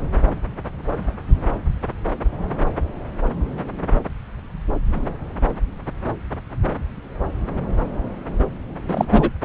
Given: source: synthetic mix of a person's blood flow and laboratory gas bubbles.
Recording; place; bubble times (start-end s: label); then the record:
Doppler ultrasound of blood flow; subclavian vein
8.88-9.30 s: bubbles
From the record:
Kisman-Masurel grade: 213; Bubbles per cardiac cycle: several, 3 to 8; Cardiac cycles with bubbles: 1 to 10%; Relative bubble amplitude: loud (0.450 to 0.775); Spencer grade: 1 (occasional bubble signal discernible with the cardiac motion signal, with majority of cardiac periods free of bubbles); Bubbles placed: anywhere in the cardiac cycle